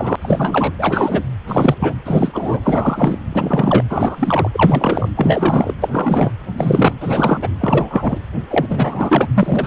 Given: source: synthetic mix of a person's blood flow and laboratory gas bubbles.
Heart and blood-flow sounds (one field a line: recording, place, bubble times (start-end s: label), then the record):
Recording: Doppler ultrasound of blood flow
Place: precordium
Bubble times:
0.00-0.16 s: bubbles
0.21-0.72 s: bubbles
0.79-1.21 s: bubbles
1.48-1.75 s: bubbles
1.79-1.93 s: bubbles
2.05-2.59 s: bubbles
2.62-3.18 s: bubbles
3.32-3.84 s: bubbles
3.89-4.50 s: bubbles
4.53-5.09 s: bubbles
5.16-5.75 s: bubbles
5.80-5.89 s: bubbles
5.92-6.31 s: bubbles
6.58-6.95 s: bubbles
7.00-7.49 s: bubbles
7.60-8.19 s: bubbles
8.50-9.28 s: bubbles
9.35-9.67 s: bubbles
From the record:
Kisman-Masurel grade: 343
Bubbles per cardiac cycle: rolling drumbeat, 9 or more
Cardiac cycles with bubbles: 100%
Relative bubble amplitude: loud (0.450 to 0.775)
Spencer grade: 3 (all of the cardiac periods contain showers or single bubble signals, but not dominating or overriding the cardiac motion signals)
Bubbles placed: anywhere in the cardiac cycle